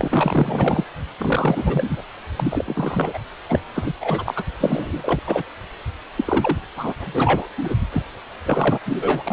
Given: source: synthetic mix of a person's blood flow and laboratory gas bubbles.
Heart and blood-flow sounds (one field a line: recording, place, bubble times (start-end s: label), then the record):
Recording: Doppler ultrasound of blood flow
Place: precordium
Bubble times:
0.00-0.84 s: bubbles
1.18-2.01 s: bubbles
2.38-3.19 s: bubbles
3.49-3.59 s: bubbles
3.74-3.92 s: bubbles
4.00-4.43 s: bubbles
4.60-5.19 s: bubbles
5.26-5.43 s: bubbles
6.16-6.58 s: bubbles
6.76-6.93 s: bubbles
7.00-7.47 s: bubbles
7.57-7.75 s: bubbles
7.92-8.02 s: bubbles
8.46-8.78 s: bubbles
8.86-9.32 s: bubbles
From the record:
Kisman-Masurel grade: 342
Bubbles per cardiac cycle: rolling drumbeat, 9 or more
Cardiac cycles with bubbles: 100%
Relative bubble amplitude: moderate (0.250 to 0.450)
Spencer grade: 3 (all of the cardiac periods contain showers or single bubble signals, but not dominating or overriding the cardiac motion signals)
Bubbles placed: anywhere in the cardiac cycle